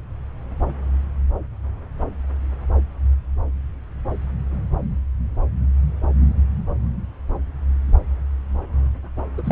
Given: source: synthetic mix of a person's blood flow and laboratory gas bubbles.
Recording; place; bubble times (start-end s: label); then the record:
Doppler ultrasound of blood flow; subclavian vein
9.38-9.52 s: bubbles
From the record:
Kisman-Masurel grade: 212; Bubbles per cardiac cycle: several, 3 to 8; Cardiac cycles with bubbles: 1 to 10%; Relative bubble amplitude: moderate (0.250 to 0.450); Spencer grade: 1 (occasional bubble signal discernible with the cardiac motion signal, with majority of cardiac periods free of bubbles); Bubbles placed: anywhere in the cardiac cycle